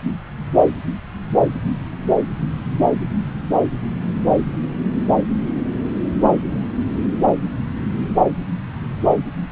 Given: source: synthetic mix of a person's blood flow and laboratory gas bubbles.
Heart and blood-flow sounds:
Doppler ultrasound of blood flow; subclavian vein
no bubbles
From the record:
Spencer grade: 0 (complete lack of bubble signals)

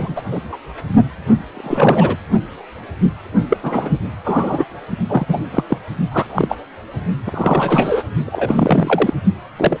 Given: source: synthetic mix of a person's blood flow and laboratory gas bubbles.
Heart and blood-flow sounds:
Doppler ultrasound of blood flow; precordium
0.00-0.21 s: bubbles
0.32-0.41 s: bubbles
0.52-0.58 s: bubbles
1.53-2.17 s: bubbles
3.50-3.57 s: bubbles
3.62-3.92 s: bubbles
4.24-4.64 s: bubbles
5.08-5.25 s: bubbles
5.28-5.43 s: bubbles
5.51-5.64 s: bubbles
5.68-5.78 s: bubbles
6.10-6.55 s: bubbles
7.25-8.03 s: bubbles
8.26-9.13 s: bubbles
9.56-9.77 s: bubbles
From the record:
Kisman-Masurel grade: 233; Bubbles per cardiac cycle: several, 3 to 8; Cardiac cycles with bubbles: 50 to 99%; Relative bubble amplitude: loud (0.450 to 0.775); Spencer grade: 3 (all of the cardiac periods contain showers or single bubble signals, but not dominating or overriding the cardiac motion signals); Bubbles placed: only in the low amplitude regions of the cardiac cycle

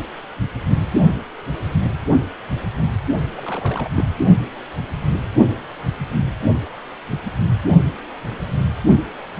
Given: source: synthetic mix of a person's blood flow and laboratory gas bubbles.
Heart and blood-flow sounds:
Doppler ultrasound of blood flow; precordium
3.27-3.89 s: bubbles
3.94-4.08 s: bubbles
From the record:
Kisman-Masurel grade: 211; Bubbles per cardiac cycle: several, 3 to 8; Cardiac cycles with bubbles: 1 to 10%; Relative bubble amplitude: barely perceptible (0.100 to 0.250); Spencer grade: 1 (occasional bubble signal discernible with the cardiac motion signal, with majority of cardiac periods free of bubbles); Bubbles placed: only in the low amplitude regions of the cardiac cycle

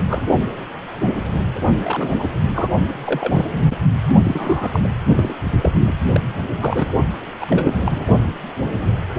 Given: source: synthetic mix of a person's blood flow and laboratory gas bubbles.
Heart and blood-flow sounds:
Doppler ultrasound of blood flow; precordium
0.09-0.22 s: bubbles
1.83-2.10 s: bubbles
2.19-2.28 s: bubbles
2.42-2.50 s: bubbles
2.54-2.69 s: bubbles
3.04-3.65 s: bubbles
4.23-4.80 s: bubbles
4.84-4.88 s: bubbles
5.13-5.35 s: bubbles
5.61-5.71 s: bubbles
5.85-5.95 s: bubbles
6.12-6.34 s: bubbles
6.61-6.93 s: bubbles
7.40-7.46 s: bubbles
7.50-7.79 s: bubbles
7.84-8.04 s: bubbles
From the record:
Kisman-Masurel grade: 222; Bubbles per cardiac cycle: several, 3 to 8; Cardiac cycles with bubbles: 10 to 50%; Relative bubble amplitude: moderate (0.250 to 0.450); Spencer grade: 2 (many but less than half of the cardiac periods contain bubble signals, singularly or in groups); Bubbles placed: only in the low amplitude regions of the cardiac cycle

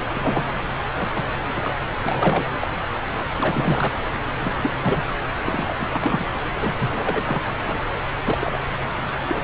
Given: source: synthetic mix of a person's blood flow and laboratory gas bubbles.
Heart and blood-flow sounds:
Doppler ultrasound of blood flow; subclavian vein
0.15-0.43 s: bubbles
0.98-1.08 s: bubbles
1.15-1.23 s: bubbles
1.37-1.78 s: bubbles
2.04-2.46 s: bubbles
2.60-2.71 s: bubbles
3.38-3.93 s: bubbles
4.42-4.51 s: bubbles
4.62-4.71 s: bubbles
4.82-5.03 s: bubbles
5.38-5.42 s: bubbles
5.46-6.25 s: bubbles
6.54-6.74 s: bubbles
6.79-7.42 s: bubbles
7.65-7.79 s: bubbles
8.25-8.38 s: bubbles
8.40-8.60 s: bubbles
9.28-9.44 s: bubbles
From the record:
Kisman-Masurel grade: 232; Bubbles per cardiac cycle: several, 3 to 8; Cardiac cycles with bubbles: 50 to 99%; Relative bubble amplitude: moderate (0.250 to 0.450); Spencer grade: 3 (all of the cardiac periods contain showers or single bubble signals, but not dominating or overriding the cardiac motion signals); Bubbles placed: anywhere in the cardiac cycle

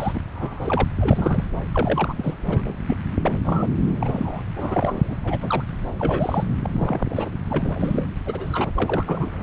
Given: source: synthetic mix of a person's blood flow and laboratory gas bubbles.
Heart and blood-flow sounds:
Doppler ultrasound of blood flow; subclavian vein
0.00-0.21 s: bubbles
0.34-0.85 s: bubbles
1.00-1.45 s: bubbles
1.73-2.14 s: bubbles
2.17-2.34 s: bubbles
2.48-2.75 s: bubbles
2.88-2.98 s: bubbles
3.21-3.68 s: bubbles
4.00-4.44 s: bubbles
4.56-5.00 s: bubbles
5.08-5.16 s: bubbles
5.24-5.64 s: bubbles
5.99-6.44 s: bubbles
6.63-6.69 s: bubbles
6.72-7.29 s: bubbles
7.46-8.06 s: bubbles
8.26-8.71 s: bubbles
8.76-9.34 s: bubbles
From the record:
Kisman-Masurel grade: 242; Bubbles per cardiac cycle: several, 3 to 8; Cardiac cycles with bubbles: 100%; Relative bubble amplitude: moderate (0.250 to 0.450); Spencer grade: 3 (all of the cardiac periods contain showers or single bubble signals, but not dominating or overriding the cardiac motion signals); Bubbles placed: anywhere in the cardiac cycle

